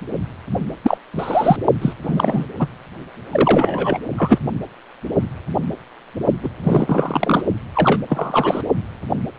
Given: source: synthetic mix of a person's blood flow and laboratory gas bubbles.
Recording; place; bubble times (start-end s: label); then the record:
Doppler ultrasound of blood flow; precordium
0.83-0.98 s: bubbles
1.19-1.56 s: bubbles
1.81-1.93 s: bubbles
2.02-2.46 s: bubbles
2.59-2.67 s: bubbles
3.31-3.98 s: bubbles
4.17-4.38 s: bubbles
6.43-6.49 s: bubbles
6.63-7.42 s: bubbles
7.73-8.03 s: bubbles
8.09-8.62 s: bubbles
From the record:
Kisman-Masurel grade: 233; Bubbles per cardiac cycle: several, 3 to 8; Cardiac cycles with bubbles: 50 to 99%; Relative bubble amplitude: loud (0.450 to 0.775); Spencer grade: 3 (all of the cardiac periods contain showers or single bubble signals, but not dominating or overriding the cardiac motion signals); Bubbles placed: only in the low amplitude regions of the cardiac cycle